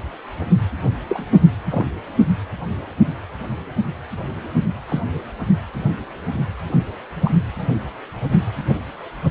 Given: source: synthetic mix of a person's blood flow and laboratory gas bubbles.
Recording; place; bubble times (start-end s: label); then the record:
Doppler ultrasound of blood flow; precordium
1.08-1.24 s: bubbles
1.71-1.85 s: bubbles
4.88-5.00 s: bubbles
7.24-7.31 s: bubbles
From the record:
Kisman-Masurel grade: 122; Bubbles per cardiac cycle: 1 to 2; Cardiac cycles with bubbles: 10 to 50%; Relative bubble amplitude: moderate (0.250 to 0.450); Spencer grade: 2 (many but less than half of the cardiac periods contain bubble signals, singularly or in groups); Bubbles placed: anywhere in the cardiac cycle